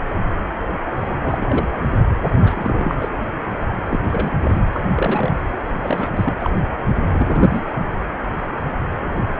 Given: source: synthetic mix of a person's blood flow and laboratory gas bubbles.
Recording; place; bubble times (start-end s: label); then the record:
Doppler ultrasound of blood flow; precordium
1.01-1.68 s: bubbles
2.41-2.95 s: bubbles
2.99-3.09 s: bubbles
3.91-4.00 s: bubbles
4.03-4.65 s: bubbles
4.72-4.80 s: bubbles
4.95-5.41 s: bubbles
5.83-6.09 s: bubbles
6.12-6.33 s: bubbles
6.40-6.50 s: bubbles
7.07-7.64 s: bubbles
From the record:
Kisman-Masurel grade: 332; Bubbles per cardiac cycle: rolling drumbeat, 9 or more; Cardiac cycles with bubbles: 50 to 99%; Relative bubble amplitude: moderate (0.250 to 0.450); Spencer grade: 3 (all of the cardiac periods contain showers or single bubble signals, but not dominating or overriding the cardiac motion signals); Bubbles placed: anywhere in the cardiac cycle